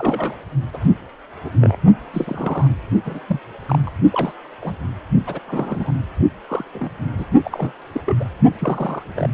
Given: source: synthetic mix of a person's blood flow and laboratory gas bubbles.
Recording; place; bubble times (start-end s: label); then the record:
Doppler ultrasound of blood flow; precordium
0.00-0.34 s: bubbles
0.73-0.78 s: bubbles
1.44-1.50 s: bubbles
1.61-1.76 s: bubbles
2.13-2.67 s: bubbles
3.04-3.20 s: bubbles
3.27-3.40 s: bubbles
3.59-3.93 s: bubbles
4.13-4.33 s: bubbles
4.61-4.74 s: bubbles
5.26-5.39 s: bubbles
5.48-5.91 s: bubbles
6.48-6.65 s: bubbles
6.74-6.90 s: bubbles
7.18-7.25 s: bubbles
7.44-7.73 s: bubbles
7.93-8.01 s: bubbles
8.06-8.16 s: bubbles
8.20-8.25 s: bubbles
8.58-9.02 s: bubbles
9.16-9.30 s: bubbles
From the record:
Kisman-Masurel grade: 242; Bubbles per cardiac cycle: several, 3 to 8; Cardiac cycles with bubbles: 100%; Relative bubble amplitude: moderate (0.250 to 0.450); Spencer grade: 3 (all of the cardiac periods contain showers or single bubble signals, but not dominating or overriding the cardiac motion signals); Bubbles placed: only in the low amplitude regions of the cardiac cycle